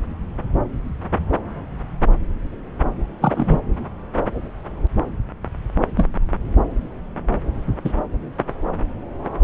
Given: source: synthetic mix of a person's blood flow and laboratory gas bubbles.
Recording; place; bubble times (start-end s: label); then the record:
Doppler ultrasound of blood flow; subclavian vein
3.21-3.59 s: bubbles
5.96-6.08 s: bubbles
7.84-7.93 s: bubbles
From the record:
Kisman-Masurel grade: 123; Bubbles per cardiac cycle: 1 to 2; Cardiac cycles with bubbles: 10 to 50%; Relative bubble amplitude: loud (0.450 to 0.775); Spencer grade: 2 (many but less than half of the cardiac periods contain bubble signals, singularly or in groups); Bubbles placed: anywhere in the cardiac cycle